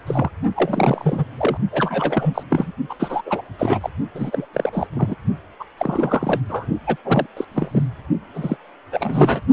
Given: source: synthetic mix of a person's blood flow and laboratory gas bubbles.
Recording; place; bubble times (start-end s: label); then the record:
Doppler ultrasound of blood flow; precordium
0.07-0.30 s: bubbles
0.55-1.24 s: bubbles
1.37-1.57 s: bubbles
1.71-2.43 s: bubbles
2.50-2.72 s: bubbles
2.89-2.95 s: bubbles
2.99-3.22 s: bubbles
3.26-3.42 s: bubbles
3.59-3.90 s: bubbles
4.15-4.47 s: bubbles
4.53-4.87 s: bubbles
4.94-5.16 s: bubbles
5.60-5.65 s: bubbles
5.78-6.40 s: bubbles
6.49-6.66 s: bubbles
6.87-6.96 s: bubbles
7.04-7.27 s: bubbles
7.37-7.45 s: bubbles
7.52-7.87 s: bubbles
8.34-8.56 s: bubbles
8.92-9.40 s: bubbles
From the record:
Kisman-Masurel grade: 342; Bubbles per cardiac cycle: rolling drumbeat, 9 or more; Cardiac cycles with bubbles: 100%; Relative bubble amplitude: moderate (0.250 to 0.450); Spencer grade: 3 (all of the cardiac periods contain showers or single bubble signals, but not dominating or overriding the cardiac motion signals); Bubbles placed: only in the low amplitude regions of the cardiac cycle